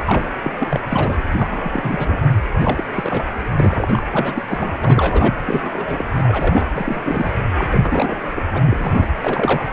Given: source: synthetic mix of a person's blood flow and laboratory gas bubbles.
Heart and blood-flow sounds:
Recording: Doppler ultrasound of blood flow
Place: precordium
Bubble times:
0.05-0.31 s: bubbles
0.42-0.52 s: bubbles
0.58-0.80 s: bubbles
0.91-1.22 s: bubbles
1.31-2.17 s: bubbles
2.60-2.83 s: bubbles
2.94-3.23 s: bubbles
3.60-4.03 s: bubbles
4.11-4.72 s: bubbles
4.81-5.38 s: bubbles
5.44-5.69 s: bubbles
5.72-6.05 s: bubbles
6.15-6.66 s: bubbles
6.73-7.01 s: bubbles
7.04-7.31 s: bubbles
7.57-7.67 s: bubbles
7.71-8.17 s: bubbles
8.36-8.43 s: bubbles
8.53-8.62 s: bubbles
8.65-9.13 s: bubbles
9.24-9.64 s: bubbles
From the record:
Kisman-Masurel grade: 342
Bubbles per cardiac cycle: rolling drumbeat, 9 or more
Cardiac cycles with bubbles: 100%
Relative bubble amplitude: moderate (0.250 to 0.450)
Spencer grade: 3 (all of the cardiac periods contain showers or single bubble signals, but not dominating or overriding the cardiac motion signals)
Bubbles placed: anywhere in the cardiac cycle

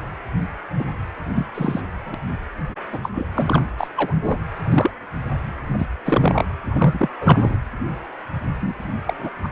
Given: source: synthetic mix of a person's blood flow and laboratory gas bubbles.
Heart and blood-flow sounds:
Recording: Doppler ultrasound of blood flow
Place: precordium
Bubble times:
0.79-0.84 s: bubbles
1.35-1.49 s: bubbles
1.54-1.81 s: bubbles
2.06-2.15 s: bubbles
2.92-2.99 s: bubbles
3.02-3.11 s: bubbles
3.14-3.29 s: bubbles
3.36-3.67 s: bubbles
3.78-3.89 s: bubbles
3.96-4.14 s: bubbles
4.21-4.37 s: bubbles
4.60-4.92 s: bubbles
5.67-5.87 s: bubbles
6.05-6.45 s: bubbles
6.70-7.08 s: bubbles
7.21-7.55 s: bubbles
8.54-8.94 s: bubbles
9.07-9.14 s: bubbles
9.19-9.29 s: bubbles
9.43-9.48 s: bubbles
From the record:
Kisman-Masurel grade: 233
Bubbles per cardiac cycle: several, 3 to 8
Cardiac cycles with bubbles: 50 to 99%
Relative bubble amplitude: loud (0.450 to 0.775)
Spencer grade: 3 (all of the cardiac periods contain showers or single bubble signals, but not dominating or overriding the cardiac motion signals)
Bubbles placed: anywhere in the cardiac cycle

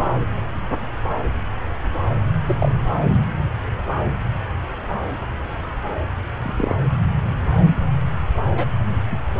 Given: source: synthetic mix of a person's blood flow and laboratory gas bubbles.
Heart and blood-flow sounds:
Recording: Doppler ultrasound of blood flow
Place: subclavian vein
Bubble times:
2.46-2.55 s: bubbles
2.58-2.71 s: bubbles
6.42-6.75 s: bubbles
8.57-8.66 s: bubbles
9.12-9.17 s: bubbles
From the record:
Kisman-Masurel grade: 122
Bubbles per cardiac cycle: 1 to 2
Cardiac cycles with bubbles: 10 to 50%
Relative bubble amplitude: moderate (0.250 to 0.450)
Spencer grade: 2 (many but less than half of the cardiac periods contain bubble signals, singularly or in groups)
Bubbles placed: anywhere in the cardiac cycle

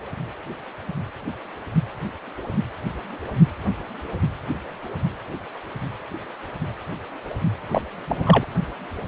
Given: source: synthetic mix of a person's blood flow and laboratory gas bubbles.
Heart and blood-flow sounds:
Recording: Doppler ultrasound of blood flow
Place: precordium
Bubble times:
7.68-7.82 s: bubbles
8.07-8.46 s: bubbles
From the record:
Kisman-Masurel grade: 212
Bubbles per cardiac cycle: several, 3 to 8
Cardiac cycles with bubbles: 1 to 10%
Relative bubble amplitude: moderate (0.250 to 0.450)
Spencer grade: 1 (occasional bubble signal discernible with the cardiac motion signal, with majority of cardiac periods free of bubbles)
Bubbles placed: anywhere in the cardiac cycle

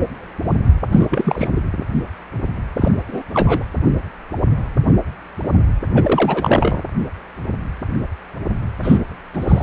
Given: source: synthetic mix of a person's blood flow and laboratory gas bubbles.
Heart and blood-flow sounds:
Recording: Doppler ultrasound of blood flow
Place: precordium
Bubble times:
0.92-1.07 s: bubbles
1.10-1.48 s: bubbles
1.56-1.60 s: bubbles
2.75-2.91 s: bubbles
3.08-3.22 s: bubbles
3.34-3.63 s: bubbles
5.95-6.82 s: bubbles
8.83-8.98 s: bubbles
9.33-9.63 s: bubbles
From the record:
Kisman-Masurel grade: 223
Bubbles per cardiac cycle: several, 3 to 8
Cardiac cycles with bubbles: 10 to 50%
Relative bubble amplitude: loud (0.450 to 0.775)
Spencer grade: 2 (many but less than half of the cardiac periods contain bubble signals, singularly or in groups)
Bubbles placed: anywhere in the cardiac cycle

